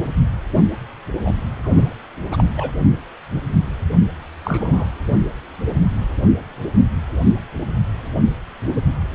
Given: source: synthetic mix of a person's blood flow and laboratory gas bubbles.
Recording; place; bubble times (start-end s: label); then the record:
Doppler ultrasound of blood flow; precordium
1.25-1.36 s: bubbles
1.64-1.93 s: bubbles
2.30-2.45 s: bubbles
2.56-2.71 s: bubbles
4.45-4.85 s: bubbles
From the record:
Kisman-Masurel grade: 222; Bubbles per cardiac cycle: several, 3 to 8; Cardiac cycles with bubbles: 10 to 50%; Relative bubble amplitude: moderate (0.250 to 0.450); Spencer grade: 2 (many but less than half of the cardiac periods contain bubble signals, singularly or in groups); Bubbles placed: only in the low amplitude regions of the cardiac cycle